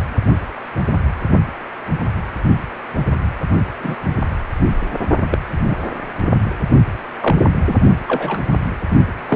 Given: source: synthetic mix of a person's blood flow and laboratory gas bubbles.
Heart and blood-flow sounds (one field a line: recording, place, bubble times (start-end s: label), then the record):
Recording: Doppler ultrasound of blood flow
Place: precordium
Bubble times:
3.80-3.96 s: bubbles
5.30-5.38 s: bubbles
5.68-5.78 s: bubbles
7.21-7.35 s: bubbles
7.67-7.75 s: bubbles
8.08-8.40 s: bubbles
9.28-9.36 s: bubbles
From the record:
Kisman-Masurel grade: 122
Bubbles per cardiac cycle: 1 to 2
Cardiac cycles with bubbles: 10 to 50%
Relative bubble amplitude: moderate (0.250 to 0.450)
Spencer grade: 2 (many but less than half of the cardiac periods contain bubble signals, singularly or in groups)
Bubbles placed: only in the low amplitude regions of the cardiac cycle